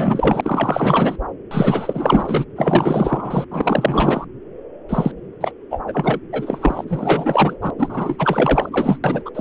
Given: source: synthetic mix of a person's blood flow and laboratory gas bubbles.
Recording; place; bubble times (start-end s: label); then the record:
Doppler ultrasound of blood flow; subclavian vein
0.00-1.18 s: bubbles
1.51-2.45 s: bubbles
2.56-3.46 s: bubbles
3.50-4.24 s: bubbles
4.89-5.12 s: bubbles
5.40-5.52 s: bubbles
5.70-5.82 s: bubbles
5.87-6.19 s: bubbles
6.32-6.85 s: bubbles
6.88-7.56 s: bubbles
7.61-7.71 s: bubbles
7.79-8.99 s: bubbles
9.04-9.22 s: bubbles
9.25-9.31 s: bubbles
9.34-9.41 s: bubbles
From the record:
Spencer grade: 4 (maximum detectable bubble signal sounding continuously throughout systole and diastole of every cardiac period, and overriding the amplitude of the normal cardiac signals); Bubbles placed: anywhere in the cardiac cycle